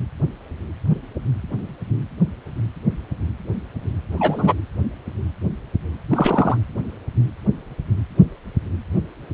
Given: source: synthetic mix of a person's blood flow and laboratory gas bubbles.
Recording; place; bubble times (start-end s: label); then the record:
Doppler ultrasound of blood flow; precordium
4.10-4.54 s: bubbles
6.09-6.57 s: bubbles
From the record:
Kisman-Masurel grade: 123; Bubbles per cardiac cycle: 1 to 2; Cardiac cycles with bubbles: 10 to 50%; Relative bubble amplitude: loud (0.450 to 0.775); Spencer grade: 2 (many but less than half of the cardiac periods contain bubble signals, singularly or in groups); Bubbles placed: anywhere in the cardiac cycle